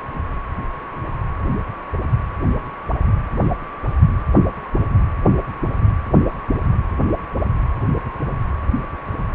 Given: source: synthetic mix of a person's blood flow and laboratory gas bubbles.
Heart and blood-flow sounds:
Doppler ultrasound of blood flow; precordium
no bubbles
From the record:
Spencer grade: 0 (complete lack of bubble signals)

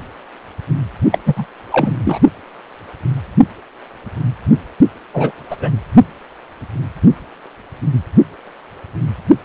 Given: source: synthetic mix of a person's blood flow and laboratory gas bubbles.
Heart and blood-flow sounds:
Doppler ultrasound of blood flow; precordium
1.11-1.19 s: bubbles
1.26-1.46 s: bubbles
1.72-1.92 s: bubbles
2.05-2.19 s: bubbles
5.13-5.32 s: bubbles
5.50-5.56 s: bubbles
5.58-5.75 s: bubbles
From the record:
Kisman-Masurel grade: 223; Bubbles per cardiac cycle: several, 3 to 8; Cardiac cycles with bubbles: 10 to 50%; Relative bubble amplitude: loud (0.450 to 0.775); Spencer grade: 2 (many but less than half of the cardiac periods contain bubble signals, singularly or in groups); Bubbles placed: only in the low amplitude regions of the cardiac cycle

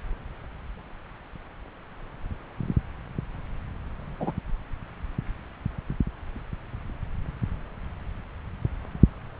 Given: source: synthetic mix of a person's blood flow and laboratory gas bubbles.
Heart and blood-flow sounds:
Doppler ultrasound of blood flow; subclavian vein
4.20-4.32 s: bubbles
From the record:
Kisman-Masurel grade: 112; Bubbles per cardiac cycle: 1 to 2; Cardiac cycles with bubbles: 1 to 10%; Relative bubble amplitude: moderate (0.250 to 0.450); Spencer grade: 1 (occasional bubble signal discernible with the cardiac motion signal, with majority of cardiac periods free of bubbles); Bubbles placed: anywhere in the cardiac cycle

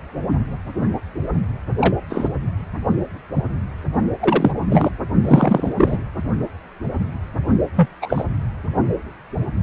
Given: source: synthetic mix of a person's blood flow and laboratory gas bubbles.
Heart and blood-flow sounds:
Doppler ultrasound of blood flow; precordium
1.80-1.95 s: bubbles
2.10-2.29 s: bubbles
4.20-4.51 s: bubbles
4.68-4.91 s: bubbles
5.22-5.72 s: bubbles
5.78-5.98 s: bubbles
7.76-7.88 s: bubbles
8.02-8.24 s: bubbles
From the record:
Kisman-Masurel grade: 233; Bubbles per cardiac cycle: several, 3 to 8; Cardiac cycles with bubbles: 50 to 99%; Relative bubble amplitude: loud (0.450 to 0.775); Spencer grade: 3 (all of the cardiac periods contain showers or single bubble signals, but not dominating or overriding the cardiac motion signals); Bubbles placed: only in the low amplitude regions of the cardiac cycle

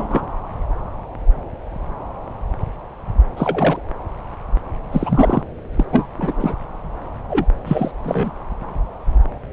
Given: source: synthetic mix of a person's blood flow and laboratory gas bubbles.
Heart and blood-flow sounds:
Doppler ultrasound of blood flow; subclavian vein
0.00-0.27 s: bubbles
3.36-3.80 s: bubbles
4.92-5.42 s: bubbles
5.75-5.85 s: bubbles
5.92-6.08 s: bubbles
6.17-6.55 s: bubbles
7.29-7.46 s: bubbles
7.65-7.92 s: bubbles
8.04-8.31 s: bubbles
From the record:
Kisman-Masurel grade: 222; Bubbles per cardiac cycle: several, 3 to 8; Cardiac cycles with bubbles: 10 to 50%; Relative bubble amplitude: moderate (0.250 to 0.450); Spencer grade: 2 (many but less than half of the cardiac periods contain bubble signals, singularly or in groups); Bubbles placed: anywhere in the cardiac cycle

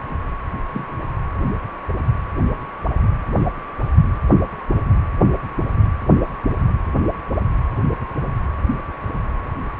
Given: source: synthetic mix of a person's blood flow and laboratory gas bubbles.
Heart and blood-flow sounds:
Doppler ultrasound of blood flow; precordium
0.73-0.87 s: bubbles
From the record:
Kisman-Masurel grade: 111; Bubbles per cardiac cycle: 1 to 2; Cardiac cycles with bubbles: 1 to 10%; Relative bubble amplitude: barely perceptible (0.100 to 0.250); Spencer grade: 1 (occasional bubble signal discernible with the cardiac motion signal, with majority of cardiac periods free of bubbles); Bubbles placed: anywhere in the cardiac cycle

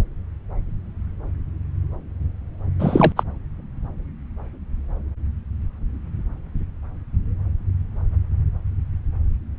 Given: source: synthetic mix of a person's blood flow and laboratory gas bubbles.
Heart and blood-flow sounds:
Doppler ultrasound of blood flow; subclavian vein
2.80-3.12 s: bubbles
3.17-3.24 s: bubbles
From the record:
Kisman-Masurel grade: 213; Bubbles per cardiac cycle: several, 3 to 8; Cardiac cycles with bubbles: 1 to 10%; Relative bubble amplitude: loud (0.450 to 0.775); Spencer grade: 1 (occasional bubble signal discernible with the cardiac motion signal, with majority of cardiac periods free of bubbles); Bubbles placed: anywhere in the cardiac cycle

